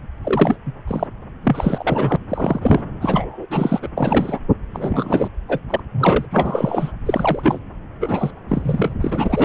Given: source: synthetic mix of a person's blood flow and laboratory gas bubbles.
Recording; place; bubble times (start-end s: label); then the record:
Doppler ultrasound of blood flow; subclavian vein
0.24-0.56 s: bubbles
0.66-0.72 s: bubbles
0.87-1.07 s: bubbles
1.44-2.16 s: bubbles
2.29-2.83 s: bubbles
3.00-3.46 s: bubbles
3.50-3.88 s: bubbles
3.97-4.39 s: bubbles
4.73-5.28 s: bubbles
5.48-5.59 s: bubbles
5.70-5.80 s: bubbles
5.92-6.25 s: bubbles
6.31-6.92 s: bubbles
7.05-7.59 s: bubbles
8.00-8.30 s: bubbles
8.49-8.94 s: bubbles
9.00-9.45 s: bubbles
From the record:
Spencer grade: 3 (all of the cardiac periods contain showers or single bubble signals, but not dominating or overriding the cardiac motion signals); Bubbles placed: anywhere in the cardiac cycle